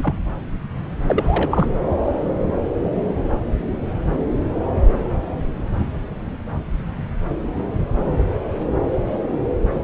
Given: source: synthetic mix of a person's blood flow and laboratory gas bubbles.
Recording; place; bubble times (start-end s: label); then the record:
Doppler ultrasound of blood flow; subclavian vein
0.00-0.16 s: bubbles
1.06-1.68 s: bubbles
From the record:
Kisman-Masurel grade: 213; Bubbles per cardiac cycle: several, 3 to 8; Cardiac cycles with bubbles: 1 to 10%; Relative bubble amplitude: loud (0.450 to 0.775); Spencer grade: 1 (occasional bubble signal discernible with the cardiac motion signal, with majority of cardiac periods free of bubbles); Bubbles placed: anywhere in the cardiac cycle